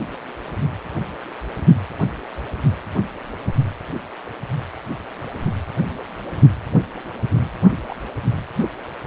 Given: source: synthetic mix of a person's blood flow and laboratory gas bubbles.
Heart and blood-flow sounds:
Doppler ultrasound of blood flow; precordium
7.87-7.95 s: bubbles
8.58-8.69 s: bubbles
From the record:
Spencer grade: 2 (many but less than half of the cardiac periods contain bubble signals, singularly or in groups); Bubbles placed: anywhere in the cardiac cycle

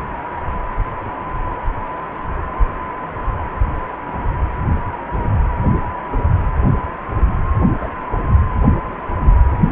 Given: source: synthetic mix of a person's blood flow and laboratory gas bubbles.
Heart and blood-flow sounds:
Doppler ultrasound of blood flow; precordium
7.80-7.89 s: bubbles
From the record:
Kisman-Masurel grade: 112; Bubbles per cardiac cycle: 1 to 2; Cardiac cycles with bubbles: 1 to 10%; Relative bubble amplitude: moderate (0.250 to 0.450); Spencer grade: 1 (occasional bubble signal discernible with the cardiac motion signal, with majority of cardiac periods free of bubbles); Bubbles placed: anywhere in the cardiac cycle

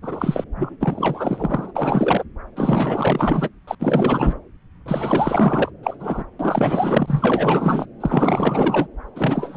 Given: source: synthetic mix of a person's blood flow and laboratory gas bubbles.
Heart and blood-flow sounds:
Doppler ultrasound of blood flow; subclavian vein
0.01-0.44 s: bubbles
0.55-0.76 s: bubbles
0.80-1.73 s: bubbles
1.75-2.24 s: bubbles
2.56-3.48 s: bubbles
3.67-3.75 s: bubbles
3.80-4.40 s: bubbles
4.86-5.71 s: bubbles
5.83-5.96 s: bubbles
6.00-6.24 s: bubbles
6.39-7.86 s: bubbles
8.00-8.88 s: bubbles
9.15-9.57 s: bubbles
From the record:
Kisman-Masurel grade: 444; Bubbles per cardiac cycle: continuous sound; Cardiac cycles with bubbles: 100%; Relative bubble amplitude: maximal (0.775 to 0.999); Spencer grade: 4 (maximum detectable bubble signal sounding continuously throughout systole and diastole of every cardiac period, and overriding the amplitude of the normal cardiac signals); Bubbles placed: anywhere in the cardiac cycle

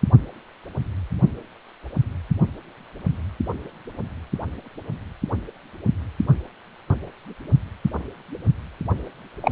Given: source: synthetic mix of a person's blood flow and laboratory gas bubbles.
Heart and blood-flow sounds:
Doppler ultrasound of blood flow; precordium
9.41-9.52 s: bubbles
From the record:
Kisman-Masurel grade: 113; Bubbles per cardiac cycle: 1 to 2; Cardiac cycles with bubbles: 1 to 10%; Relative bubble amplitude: loud (0.450 to 0.775); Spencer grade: 1 (occasional bubble signal discernible with the cardiac motion signal, with majority of cardiac periods free of bubbles); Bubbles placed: only in the low amplitude regions of the cardiac cycle

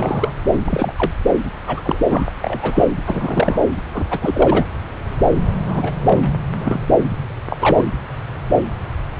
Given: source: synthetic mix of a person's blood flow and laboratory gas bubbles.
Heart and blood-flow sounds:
Doppler ultrasound of blood flow; subclavian vein
0.00-0.30 s: bubbles
0.65-0.93 s: bubbles
0.96-1.11 s: bubbles
1.67-1.98 s: bubbles
2.09-2.25 s: bubbles
2.42-2.88 s: bubbles
3.06-3.59 s: bubbles
3.90-4.07 s: bubbles
4.10-4.66 s: bubbles
5.68-5.96 s: bubbles
6.02-6.33 s: bubbles
6.52-6.79 s: bubbles
7.50-7.86 s: bubbles
From the record:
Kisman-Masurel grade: 232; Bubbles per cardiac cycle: several, 3 to 8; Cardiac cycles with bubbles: 50 to 99%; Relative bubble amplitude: moderate (0.250 to 0.450); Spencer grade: 3 (all of the cardiac periods contain showers or single bubble signals, but not dominating or overriding the cardiac motion signals); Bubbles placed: anywhere in the cardiac cycle

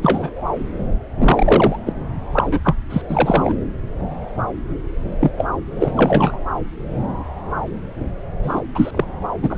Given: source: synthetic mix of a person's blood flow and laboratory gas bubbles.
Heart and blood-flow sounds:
Doppler ultrasound of blood flow; subclavian vein
0.01-0.32 s: bubbles
1.18-1.79 s: bubbles
1.85-1.93 s: bubbles
2.33-2.59 s: bubbles
2.64-2.76 s: bubbles
2.90-3.02 s: bubbles
3.08-3.54 s: bubbles
5.21-5.30 s: bubbles
5.37-5.46 s: bubbles
5.76-6.39 s: bubbles
8.42-8.61 s: bubbles
8.74-9.05 s: bubbles
9.42-9.58 s: bubbles
From the record:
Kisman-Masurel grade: 233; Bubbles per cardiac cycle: several, 3 to 8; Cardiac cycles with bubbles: 50 to 99%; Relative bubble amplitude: loud (0.450 to 0.775); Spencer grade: 3 (all of the cardiac periods contain showers or single bubble signals, but not dominating or overriding the cardiac motion signals); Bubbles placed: anywhere in the cardiac cycle

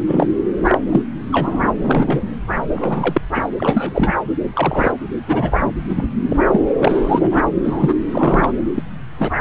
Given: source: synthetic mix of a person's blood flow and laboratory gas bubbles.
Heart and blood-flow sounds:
Doppler ultrasound of blood flow; subclavian vein
0.07-0.28 s: bubbles
0.64-0.79 s: bubbles
0.91-1.02 s: bubbles
1.31-1.71 s: bubbles
1.83-2.23 s: bubbles
2.70-3.21 s: bubbles
3.34-3.47 s: bubbles
3.58-4.14 s: bubbles
4.53-4.92 s: bubbles
5.27-5.60 s: bubbles
5.96-6.04 s: bubbles
6.29-6.36 s: bubbles
6.51-6.60 s: bubbles
6.78-7.42 s: bubbles
7.63-7.95 s: bubbles
8.11-8.53 s: bubbles
8.74-8.83 s: bubbles
9.19-9.30 s: bubbles
From the record:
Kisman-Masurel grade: 243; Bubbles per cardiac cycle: several, 3 to 8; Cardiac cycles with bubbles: 100%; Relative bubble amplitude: loud (0.450 to 0.775); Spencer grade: 3 (all of the cardiac periods contain showers or single bubble signals, but not dominating or overriding the cardiac motion signals); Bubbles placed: anywhere in the cardiac cycle

